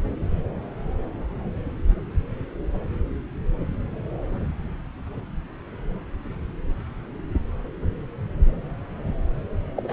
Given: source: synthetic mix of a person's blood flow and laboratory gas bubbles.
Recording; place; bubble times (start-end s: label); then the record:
Doppler ultrasound of blood flow; subclavian vein
9.76-9.93 s: bubbles
From the record:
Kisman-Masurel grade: 211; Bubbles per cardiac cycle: several, 3 to 8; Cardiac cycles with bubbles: 1 to 10%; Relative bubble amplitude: barely perceptible (0.100 to 0.250); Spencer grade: 1 (occasional bubble signal discernible with the cardiac motion signal, with majority of cardiac periods free of bubbles); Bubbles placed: anywhere in the cardiac cycle